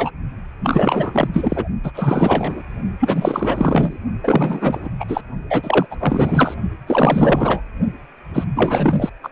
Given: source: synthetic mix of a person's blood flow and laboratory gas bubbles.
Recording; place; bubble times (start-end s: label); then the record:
Doppler ultrasound of blood flow; precordium
0.00-0.10 s: bubbles
0.63-1.28 s: bubbles
1.32-1.68 s: bubbles
1.83-1.92 s: bubbles
1.94-2.62 s: bubbles
3.00-3.98 s: bubbles
4.23-4.89 s: bubbles
4.99-5.05 s: bubbles
5.08-5.21 s: bubbles
5.49-5.86 s: bubbles
5.90-5.96 s: bubbles
6.01-6.54 s: bubbles
6.87-7.61 s: bubbles
8.33-8.45 s: bubbles
8.55-9.10 s: bubbles
9.22-9.29 s: bubbles
From the record:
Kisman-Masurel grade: 444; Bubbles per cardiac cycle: continuous sound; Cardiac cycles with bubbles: 100%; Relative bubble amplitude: maximal (0.775 to 0.999); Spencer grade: 4 (maximum detectable bubble signal sounding continuously throughout systole and diastole of every cardiac period, and overriding the amplitude of the normal cardiac signals); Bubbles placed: only in the low amplitude regions of the cardiac cycle